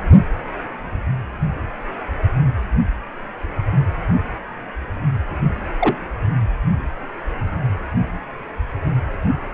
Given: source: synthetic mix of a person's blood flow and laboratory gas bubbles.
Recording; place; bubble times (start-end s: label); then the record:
Doppler ultrasound of blood flow; precordium
5.79-5.96 s: bubbles
From the record:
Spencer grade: 1 (occasional bubble signal discernible with the cardiac motion signal, with majority of cardiac periods free of bubbles); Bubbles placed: anywhere in the cardiac cycle